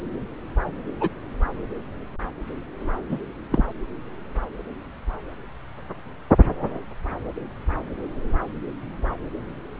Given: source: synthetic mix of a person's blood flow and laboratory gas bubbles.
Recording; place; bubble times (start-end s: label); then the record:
Doppler ultrasound of blood flow; subclavian vein
1.00-1.09 s: bubbles
3.09-3.19 s: bubbles
3.52-3.65 s: bubbles
From the record:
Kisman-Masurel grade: 122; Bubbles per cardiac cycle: 1 to 2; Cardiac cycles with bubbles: 10 to 50%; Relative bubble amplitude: moderate (0.250 to 0.450); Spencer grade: 2 (many but less than half of the cardiac periods contain bubble signals, singularly or in groups); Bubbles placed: anywhere in the cardiac cycle